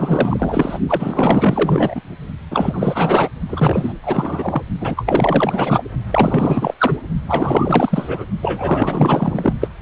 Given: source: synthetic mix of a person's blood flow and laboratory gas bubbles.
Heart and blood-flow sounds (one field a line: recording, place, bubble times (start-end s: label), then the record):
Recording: Doppler ultrasound of blood flow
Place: precordium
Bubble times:
0.00-0.78 s: bubbles
0.88-2.02 s: bubbles
2.50-3.29 s: bubbles
3.48-3.93 s: bubbles
4.03-4.64 s: bubbles
4.80-5.83 s: bubbles
6.11-6.74 s: bubbles
6.79-6.98 s: bubbles
7.27-8.25 s: bubbles
8.42-9.54 s: bubbles
9.61-9.70 s: bubbles
From the record:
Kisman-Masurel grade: 444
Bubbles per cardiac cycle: continuous sound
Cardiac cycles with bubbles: 100%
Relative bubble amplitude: maximal (0.775 to 0.999)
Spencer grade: 4 (maximum detectable bubble signal sounding continuously throughout systole and diastole of every cardiac period, and overriding the amplitude of the normal cardiac signals)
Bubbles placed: only in the low amplitude regions of the cardiac cycle